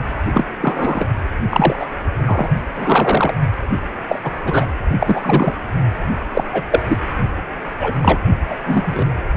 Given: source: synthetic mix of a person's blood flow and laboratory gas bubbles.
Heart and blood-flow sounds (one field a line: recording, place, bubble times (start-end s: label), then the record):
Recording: Doppler ultrasound of blood flow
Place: precordium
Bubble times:
0.34-0.47 s: bubbles
0.61-1.05 s: bubbles
1.50-1.76 s: bubbles
1.79-1.86 s: bubbles
2.26-2.49 s: bubbles
2.75-3.34 s: bubbles
4.09-4.20 s: bubbles
4.23-4.34 s: bubbles
4.45-4.65 s: bubbles
4.99-5.54 s: bubbles
6.33-6.44 s: bubbles
6.52-6.63 s: bubbles
6.71-6.83 s: bubbles
6.87-6.97 s: bubbles
7.79-7.93 s: bubbles
8.02-8.19 s: bubbles
8.50-8.56 s: bubbles
8.66-9.07 s: bubbles
From the record:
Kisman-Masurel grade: 243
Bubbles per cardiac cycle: several, 3 to 8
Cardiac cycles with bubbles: 100%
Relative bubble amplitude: loud (0.450 to 0.775)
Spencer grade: 3 (all of the cardiac periods contain showers or single bubble signals, but not dominating or overriding the cardiac motion signals)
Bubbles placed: only in the low amplitude regions of the cardiac cycle